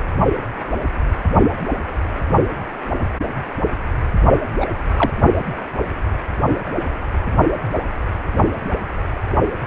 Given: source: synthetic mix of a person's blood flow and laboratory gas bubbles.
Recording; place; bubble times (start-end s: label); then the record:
Doppler ultrasound of blood flow; precordium
4.60-4.66 s: bubbles
4.96-5.10 s: bubbles
From the record:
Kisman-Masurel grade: 113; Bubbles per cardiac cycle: 1 to 2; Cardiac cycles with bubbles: 1 to 10%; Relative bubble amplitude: loud (0.450 to 0.775); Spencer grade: 1 (occasional bubble signal discernible with the cardiac motion signal, with majority of cardiac periods free of bubbles); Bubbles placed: only in the low amplitude regions of the cardiac cycle